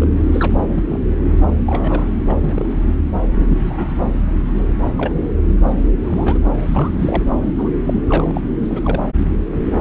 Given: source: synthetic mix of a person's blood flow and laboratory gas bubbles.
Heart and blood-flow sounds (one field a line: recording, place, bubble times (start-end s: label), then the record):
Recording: Doppler ultrasound of blood flow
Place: subclavian vein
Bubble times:
0.00-0.08 s: bubbles
0.32-0.52 s: bubbles
0.75-0.83 s: bubbles
0.91-0.99 s: bubbles
1.24-1.32 s: bubbles
1.67-2.09 s: bubbles
2.28-2.33 s: bubbles
2.41-2.78 s: bubbles
3.37-3.87 s: bubbles
3.98-4.04 s: bubbles
4.98-5.25 s: bubbles
6.03-6.38 s: bubbles
6.44-6.53 s: bubbles
6.71-7.23 s: bubbles
7.58-7.69 s: bubbles
7.86-8.00 s: bubbles
8.09-8.41 s: bubbles
8.61-9.03 s: bubbles
9.73-9.81 s: bubbles
From the record:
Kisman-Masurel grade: 242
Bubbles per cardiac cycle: several, 3 to 8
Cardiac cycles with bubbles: 100%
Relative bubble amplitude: moderate (0.250 to 0.450)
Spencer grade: 3 (all of the cardiac periods contain showers or single bubble signals, but not dominating or overriding the cardiac motion signals)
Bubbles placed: anywhere in the cardiac cycle